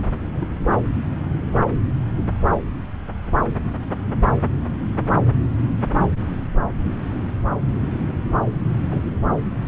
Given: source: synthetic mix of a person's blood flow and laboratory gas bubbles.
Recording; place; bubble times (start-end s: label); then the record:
Doppler ultrasound of blood flow; subclavian vein
0.33-0.47 s: bubbles
5.93-6.16 s: bubbles
8.91-9.03 s: bubbles
From the record:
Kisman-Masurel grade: 121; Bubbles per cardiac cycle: 1 to 2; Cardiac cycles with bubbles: 10 to 50%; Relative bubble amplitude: barely perceptible (0.100 to 0.250); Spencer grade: 2 (many but less than half of the cardiac periods contain bubble signals, singularly or in groups); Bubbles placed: anywhere in the cardiac cycle